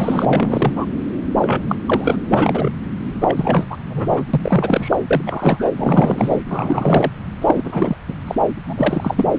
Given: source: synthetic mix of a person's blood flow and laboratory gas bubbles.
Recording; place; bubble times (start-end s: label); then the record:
Doppler ultrasound of blood flow; subclavian vein
0.00-0.86 s: bubbles
1.41-1.62 s: bubbles
1.69-1.75 s: bubbles
1.86-2.20 s: bubbles
2.30-2.70 s: bubbles
3.21-3.67 s: bubbles
3.70-3.77 s: bubbles
3.90-4.24 s: bubbles
4.33-4.97 s: bubbles
5.11-5.22 s: bubbles
5.27-5.70 s: bubbles
5.77-6.42 s: bubbles
6.49-7.11 s: bubbles
7.41-7.96 s: bubbles
8.08-8.13 s: bubbles
8.27-8.35 s: bubbles
8.68-9.39 s: bubbles
From the record:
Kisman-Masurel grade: 333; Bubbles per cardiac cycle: rolling drumbeat, 9 or more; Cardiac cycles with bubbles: 50 to 99%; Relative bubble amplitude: loud (0.450 to 0.775); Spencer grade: 3 (all of the cardiac periods contain showers or single bubble signals, but not dominating or overriding the cardiac motion signals); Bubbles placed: anywhere in the cardiac cycle